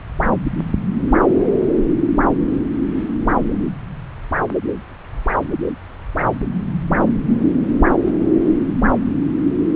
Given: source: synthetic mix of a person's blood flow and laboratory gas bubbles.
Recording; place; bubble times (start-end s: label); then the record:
Doppler ultrasound of blood flow; subclavian vein
1.40-1.44 s: bubbles
From the record:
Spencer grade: 1 (occasional bubble signal discernible with the cardiac motion signal, with majority of cardiac periods free of bubbles); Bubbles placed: anywhere in the cardiac cycle